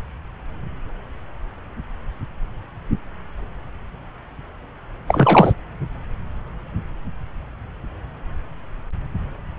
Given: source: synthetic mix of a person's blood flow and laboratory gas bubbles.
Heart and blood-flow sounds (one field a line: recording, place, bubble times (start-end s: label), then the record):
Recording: Doppler ultrasound of blood flow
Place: subclavian vein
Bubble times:
5.07-5.53 s: bubbles
From the record:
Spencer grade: 1 (occasional bubble signal discernible with the cardiac motion signal, with majority of cardiac periods free of bubbles)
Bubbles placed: anywhere in the cardiac cycle